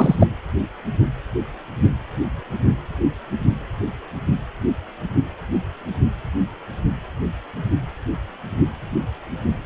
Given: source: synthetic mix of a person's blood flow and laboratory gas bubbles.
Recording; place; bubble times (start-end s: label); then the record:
Doppler ultrasound of blood flow; precordium
0.00-0.16 s: bubbles
0.20-0.27 s: bubbles
From the record:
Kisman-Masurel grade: 213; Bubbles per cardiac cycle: several, 3 to 8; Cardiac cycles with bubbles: 1 to 10%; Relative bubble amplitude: loud (0.450 to 0.775); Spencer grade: 1 (occasional bubble signal discernible with the cardiac motion signal, with majority of cardiac periods free of bubbles); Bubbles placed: anywhere in the cardiac cycle